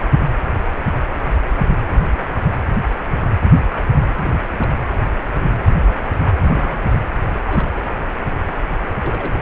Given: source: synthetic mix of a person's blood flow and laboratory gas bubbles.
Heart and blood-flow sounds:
Doppler ultrasound of blood flow; precordium
3.64-3.85 s: bubbles
4.21-4.39 s: bubbles
4.41-4.48 s: bubbles
4.51-4.78 s: bubbles
6.39-6.44 s: bubbles
6.48-6.87 s: bubbles
6.89-6.98 s: bubbles
7.34-7.41 s: bubbles
7.47-7.69 s: bubbles
7.77-7.80 s: bubbles
8.97-9.42 s: bubbles
From the record:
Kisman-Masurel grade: 221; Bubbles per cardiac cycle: several, 3 to 8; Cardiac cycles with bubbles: 10 to 50%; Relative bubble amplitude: barely perceptible (0.100 to 0.250); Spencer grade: 2 (many but less than half of the cardiac periods contain bubble signals, singularly or in groups); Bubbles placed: anywhere in the cardiac cycle

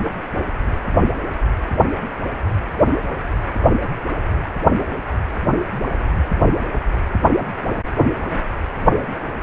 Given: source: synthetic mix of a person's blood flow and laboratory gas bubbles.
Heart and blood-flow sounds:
Doppler ultrasound of blood flow; precordium
no bubbles
From the record:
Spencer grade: 0 (complete lack of bubble signals)

